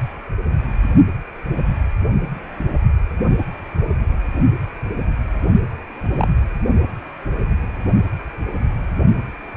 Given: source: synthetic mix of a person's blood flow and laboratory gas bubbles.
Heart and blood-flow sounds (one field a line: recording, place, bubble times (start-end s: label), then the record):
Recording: Doppler ultrasound of blood flow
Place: precordium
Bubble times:
6.12-6.27 s: bubbles
From the record:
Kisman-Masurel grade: 112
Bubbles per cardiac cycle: 1 to 2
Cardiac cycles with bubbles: 1 to 10%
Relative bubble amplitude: moderate (0.250 to 0.450)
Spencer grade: 1 (occasional bubble signal discernible with the cardiac motion signal, with majority of cardiac periods free of bubbles)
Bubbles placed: only in the low amplitude regions of the cardiac cycle